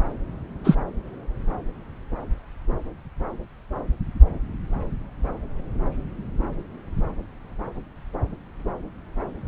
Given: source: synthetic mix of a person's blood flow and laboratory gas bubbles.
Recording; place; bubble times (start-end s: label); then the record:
Doppler ultrasound of blood flow; subclavian vein
0.64-0.76 s: bubbles
From the record:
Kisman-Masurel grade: 123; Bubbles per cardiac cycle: 1 to 2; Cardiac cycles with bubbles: 10 to 50%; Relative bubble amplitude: loud (0.450 to 0.775); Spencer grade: 2 (many but less than half of the cardiac periods contain bubble signals, singularly or in groups); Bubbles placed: anywhere in the cardiac cycle